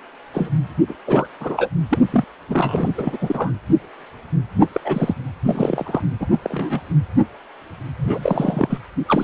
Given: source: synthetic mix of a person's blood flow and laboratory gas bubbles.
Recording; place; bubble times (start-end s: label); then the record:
Doppler ultrasound of blood flow; precordium
0.34-0.50 s: bubbles
0.89-0.94 s: bubbles
1.06-1.26 s: bubbles
1.40-1.68 s: bubbles
1.89-1.98 s: bubbles
2.11-2.24 s: bubbles
2.49-2.88 s: bubbles
2.98-3.52 s: bubbles
4.60-4.67 s: bubbles
4.72-4.80 s: bubbles
4.84-5.14 s: bubbles
5.45-6.01 s: bubbles
6.20-6.26 s: bubbles
6.32-6.39 s: bubbles
6.42-6.80 s: bubbles
7.98-8.79 s: bubbles
9.07-9.24 s: bubbles
From the record:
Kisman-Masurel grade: 233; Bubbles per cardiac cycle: several, 3 to 8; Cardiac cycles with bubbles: 50 to 99%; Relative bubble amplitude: loud (0.450 to 0.775); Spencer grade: 3 (all of the cardiac periods contain showers or single bubble signals, but not dominating or overriding the cardiac motion signals); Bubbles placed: anywhere in the cardiac cycle